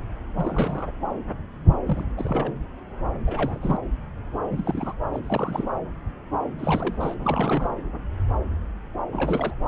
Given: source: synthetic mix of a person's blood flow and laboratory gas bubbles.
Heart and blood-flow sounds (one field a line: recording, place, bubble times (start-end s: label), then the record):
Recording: Doppler ultrasound of blood flow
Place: subclavian vein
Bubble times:
0.36-0.91 s: bubbles
1.85-2.12 s: bubbles
2.17-2.52 s: bubbles
3.27-3.79 s: bubbles
4.50-4.93 s: bubbles
5.13-5.19 s: bubbles
5.22-5.67 s: bubbles
6.58-6.96 s: bubbles
6.99-7.15 s: bubbles
7.19-7.71 s: bubbles
9.12-9.54 s: bubbles
From the record:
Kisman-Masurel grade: 332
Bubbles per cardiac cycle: rolling drumbeat, 9 or more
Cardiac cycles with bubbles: 50 to 99%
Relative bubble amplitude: moderate (0.250 to 0.450)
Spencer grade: 3 (all of the cardiac periods contain showers or single bubble signals, but not dominating or overriding the cardiac motion signals)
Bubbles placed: anywhere in the cardiac cycle